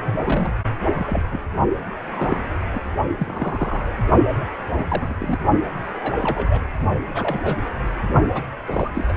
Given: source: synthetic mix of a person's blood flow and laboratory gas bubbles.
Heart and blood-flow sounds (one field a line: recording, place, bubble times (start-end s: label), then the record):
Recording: Doppler ultrasound of blood flow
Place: precordium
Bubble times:
0.24-0.54 s: bubbles
0.93-1.22 s: bubbles
1.29-1.42 s: bubbles
2.08-2.50 s: bubbles
2.73-2.79 s: bubbles
3.17-3.95 s: bubbles
4.69-5.14 s: bubbles
5.19-5.39 s: bubbles
5.95-6.60 s: bubbles
7.14-7.57 s: bubbles
8.34-8.43 s: bubbles
8.67-8.91 s: bubbles
8.94-9.17 s: bubbles
From the record:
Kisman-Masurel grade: 242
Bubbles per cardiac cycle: several, 3 to 8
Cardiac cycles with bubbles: 100%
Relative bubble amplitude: moderate (0.250 to 0.450)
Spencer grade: 3 (all of the cardiac periods contain showers or single bubble signals, but not dominating or overriding the cardiac motion signals)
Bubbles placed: only in the low amplitude regions of the cardiac cycle